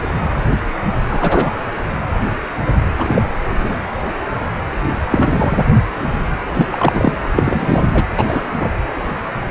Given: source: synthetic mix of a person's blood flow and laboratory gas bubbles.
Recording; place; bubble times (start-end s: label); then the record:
Doppler ultrasound of blood flow; precordium
1.09-1.51 s: bubbles
2.98-3.22 s: bubbles
3.58-3.76 s: bubbles
5.11-5.65 s: bubbles
6.54-6.66 s: bubbles
6.72-7.12 s: bubbles
7.36-7.87 s: bubbles
7.93-8.05 s: bubbles
8.17-8.24 s: bubbles
8.28-8.40 s: bubbles
8.59-8.68 s: bubbles
From the record:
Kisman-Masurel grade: 223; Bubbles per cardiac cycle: several, 3 to 8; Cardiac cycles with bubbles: 10 to 50%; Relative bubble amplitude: loud (0.450 to 0.775); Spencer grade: 2 (many but less than half of the cardiac periods contain bubble signals, singularly or in groups); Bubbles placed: anywhere in the cardiac cycle